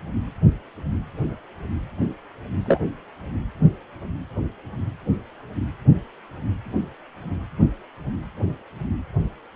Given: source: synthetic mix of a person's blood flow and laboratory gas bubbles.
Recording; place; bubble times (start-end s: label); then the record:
Doppler ultrasound of blood flow; precordium
2.66-2.80 s: bubbles
From the record:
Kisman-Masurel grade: 113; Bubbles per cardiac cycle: 1 to 2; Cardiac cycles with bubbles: 1 to 10%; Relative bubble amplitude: loud (0.450 to 0.775); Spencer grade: 1 (occasional bubble signal discernible with the cardiac motion signal, with majority of cardiac periods free of bubbles); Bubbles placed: anywhere in the cardiac cycle